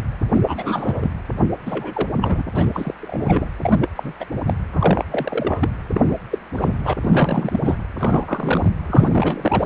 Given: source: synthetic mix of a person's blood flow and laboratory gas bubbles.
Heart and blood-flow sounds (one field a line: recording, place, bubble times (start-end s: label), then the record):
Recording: Doppler ultrasound of blood flow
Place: precordium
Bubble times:
0.32-1.14 s: bubbles
1.66-2.09 s: bubbles
2.21-2.44 s: bubbles
2.55-2.95 s: bubbles
3.01-3.47 s: bubbles
3.61-3.89 s: bubbles
3.95-4.13 s: bubbles
4.20-4.26 s: bubbles
4.31-4.38 s: bubbles
4.46-4.54 s: bubbles
4.72-5.04 s: bubbles
5.11-5.69 s: bubbles
5.93-6.01 s: bubbles
6.04-6.14 s: bubbles
6.31-6.38 s: bubbles
6.54-6.73 s: bubbles
6.84-6.94 s: bubbles
7.01-7.60 s: bubbles
7.63-7.76 s: bubbles
7.98-8.71 s: bubbles
8.87-9.66 s: bubbles
From the record:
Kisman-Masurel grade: 342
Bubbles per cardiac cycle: rolling drumbeat, 9 or more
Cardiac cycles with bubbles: 100%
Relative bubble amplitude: moderate (0.250 to 0.450)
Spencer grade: 3 (all of the cardiac periods contain showers or single bubble signals, but not dominating or overriding the cardiac motion signals)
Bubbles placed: anywhere in the cardiac cycle